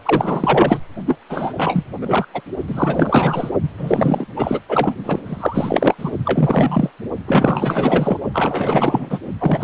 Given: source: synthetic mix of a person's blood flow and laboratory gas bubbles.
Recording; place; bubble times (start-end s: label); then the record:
Doppler ultrasound of blood flow; precordium
0.05-0.80 s: bubbles
1.05-1.17 s: bubbles
1.29-1.53 s: bubbles
1.57-1.85 s: bubbles
2.01-2.27 s: bubbles
2.34-2.42 s: bubbles
2.68-3.51 s: bubbles
3.62-3.69 s: bubbles
3.78-4.25 s: bubbles
4.36-4.59 s: bubbles
4.68-4.93 s: bubbles
5.05-5.19 s: bubbles
5.25-5.94 s: bubbles
5.98-6.11 s: bubbles
6.25-6.90 s: bubbles
7.27-8.18 s: bubbles
8.34-9.19 s: bubbles
9.38-9.64 s: bubbles
From the record:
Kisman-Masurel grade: 444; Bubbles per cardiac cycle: continuous sound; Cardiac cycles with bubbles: 100%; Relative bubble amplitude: maximal (0.775 to 0.999); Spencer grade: 4 (maximum detectable bubble signal sounding continuously throughout systole and diastole of every cardiac period, and overriding the amplitude of the normal cardiac signals); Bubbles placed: only in the low amplitude regions of the cardiac cycle